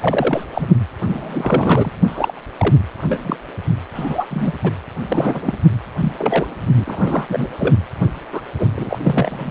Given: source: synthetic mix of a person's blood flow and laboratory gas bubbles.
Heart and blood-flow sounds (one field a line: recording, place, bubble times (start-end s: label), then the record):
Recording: Doppler ultrasound of blood flow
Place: precordium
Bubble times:
0.00-0.45 s: bubbles
0.53-0.67 s: bubbles
1.05-1.91 s: bubbles
2.06-2.33 s: bubbles
2.58-2.75 s: bubbles
2.98-3.38 s: bubbles
3.94-4.26 s: bubbles
4.30-4.53 s: bubbles
4.63-4.71 s: bubbles
5.08-5.58 s: bubbles
6.00-6.12 s: bubbles
6.18-6.58 s: bubbles
6.76-7.50 s: bubbles
7.59-7.76 s: bubbles
8.32-8.41 s: bubbles
8.59-8.68 s: bubbles
8.76-8.98 s: bubbles
9.03-9.49 s: bubbles
From the record:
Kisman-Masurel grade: 233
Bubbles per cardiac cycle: several, 3 to 8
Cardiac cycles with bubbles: 50 to 99%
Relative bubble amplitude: loud (0.450 to 0.775)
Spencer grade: 3 (all of the cardiac periods contain showers or single bubble signals, but not dominating or overriding the cardiac motion signals)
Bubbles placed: anywhere in the cardiac cycle